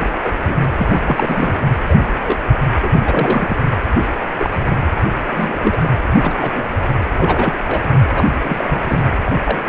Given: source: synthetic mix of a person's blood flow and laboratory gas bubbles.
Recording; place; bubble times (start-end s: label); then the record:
Doppler ultrasound of blood flow; precordium
0.00-0.08 s: bubbles
0.16-0.32 s: bubbles
0.45-0.55 s: bubbles
0.77-1.01 s: bubbles
1.04-1.55 s: bubbles
1.89-1.98 s: bubbles
2.26-2.39 s: bubbles
2.76-2.79 s: bubbles
2.82-2.89 s: bubbles
2.91-3.02 s: bubbles
3.06-3.57 s: bubbles
4.38-4.64 s: bubbles
5.26-5.89 s: bubbles
6.10-6.64 s: bubbles
7.17-7.56 s: bubbles
7.68-7.80 s: bubbles
8.15-8.25 s: bubbles
8.44-9.04 s: bubbles
9.25-9.32 s: bubbles
9.44-9.59 s: bubbles
From the record:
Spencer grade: 3 (all of the cardiac periods contain showers or single bubble signals, but not dominating or overriding the cardiac motion signals); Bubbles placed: anywhere in the cardiac cycle